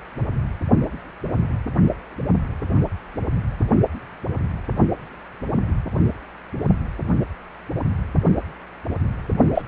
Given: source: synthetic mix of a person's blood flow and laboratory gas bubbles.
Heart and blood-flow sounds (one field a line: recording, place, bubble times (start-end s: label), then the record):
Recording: Doppler ultrasound of blood flow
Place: precordium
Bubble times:
9.54-9.62 s: bubbles
From the record:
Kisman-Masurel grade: 212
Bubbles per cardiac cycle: several, 3 to 8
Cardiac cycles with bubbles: 1 to 10%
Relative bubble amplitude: moderate (0.250 to 0.450)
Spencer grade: 1 (occasional bubble signal discernible with the cardiac motion signal, with majority of cardiac periods free of bubbles)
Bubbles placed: only in the low amplitude regions of the cardiac cycle